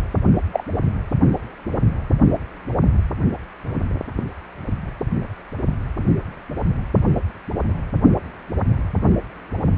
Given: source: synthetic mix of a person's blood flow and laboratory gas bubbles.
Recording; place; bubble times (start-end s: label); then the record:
Doppler ultrasound of blood flow; precordium
0.53-0.64 s: bubbles
From the record:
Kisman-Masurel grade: 112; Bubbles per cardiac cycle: 1 to 2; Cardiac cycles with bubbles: 1 to 10%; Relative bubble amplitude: moderate (0.250 to 0.450); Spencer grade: 1 (occasional bubble signal discernible with the cardiac motion signal, with majority of cardiac periods free of bubbles); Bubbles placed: anywhere in the cardiac cycle